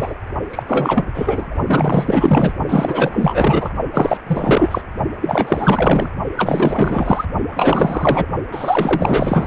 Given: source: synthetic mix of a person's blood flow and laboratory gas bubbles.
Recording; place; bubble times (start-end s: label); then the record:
Doppler ultrasound of blood flow; precordium
0.00-0.15 s: bubbles
0.51-0.63 s: bubbles
0.67-1.07 s: bubbles
1.14-1.55 s: bubbles
1.67-2.53 s: bubbles
2.69-3.74 s: bubbles
3.94-4.18 s: bubbles
4.27-4.82 s: bubbles
5.21-6.10 s: bubbles
6.37-7.25 s: bubbles
7.49-8.27 s: bubbles
8.52-9.47 s: bubbles
From the record:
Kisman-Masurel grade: 444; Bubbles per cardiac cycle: continuous sound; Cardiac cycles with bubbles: 100%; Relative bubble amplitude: maximal (0.775 to 0.999); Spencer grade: 4 (maximum detectable bubble signal sounding continuously throughout systole and diastole of every cardiac period, and overriding the amplitude of the normal cardiac signals); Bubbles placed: only in the low amplitude regions of the cardiac cycle